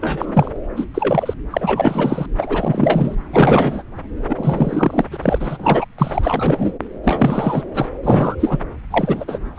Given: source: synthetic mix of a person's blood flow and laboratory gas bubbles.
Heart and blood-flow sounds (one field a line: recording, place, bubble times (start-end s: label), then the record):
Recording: Doppler ultrasound of blood flow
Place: subclavian vein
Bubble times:
0.01-0.51 s: bubbles
0.55-0.58 s: bubbles
0.76-0.84 s: bubbles
0.94-1.34 s: bubbles
1.50-2.26 s: bubbles
2.37-3.15 s: bubbles
3.33-3.83 s: bubbles
4.29-5.04 s: bubbles
5.11-5.17 s: bubbles
5.22-5.85 s: bubbles
5.98-6.73 s: bubbles
7.04-7.62 s: bubbles
7.75-7.88 s: bubbles
8.03-8.36 s: bubbles
8.39-8.58 s: bubbles
8.90-9.25 s: bubbles
9.27-9.39 s: bubbles
9.55-9.59 s: bubbles
From the record:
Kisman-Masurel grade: 343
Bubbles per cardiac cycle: rolling drumbeat, 9 or more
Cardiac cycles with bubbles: 100%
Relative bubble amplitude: loud (0.450 to 0.775)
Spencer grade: 3 (all of the cardiac periods contain showers or single bubble signals, but not dominating or overriding the cardiac motion signals)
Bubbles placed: anywhere in the cardiac cycle